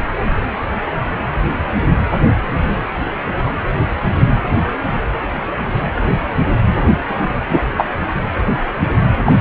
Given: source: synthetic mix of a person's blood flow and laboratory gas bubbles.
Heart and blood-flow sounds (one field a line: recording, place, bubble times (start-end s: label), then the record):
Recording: Doppler ultrasound of blood flow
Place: precordium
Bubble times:
7.08-7.28 s: bubbles
7.48-7.63 s: bubbles
7.77-7.86 s: bubbles
9.24-9.32 s: bubbles
From the record:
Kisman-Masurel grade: 223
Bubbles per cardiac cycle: several, 3 to 8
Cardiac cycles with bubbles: 10 to 50%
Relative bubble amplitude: loud (0.450 to 0.775)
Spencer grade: 2 (many but less than half of the cardiac periods contain bubble signals, singularly or in groups)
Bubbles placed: anywhere in the cardiac cycle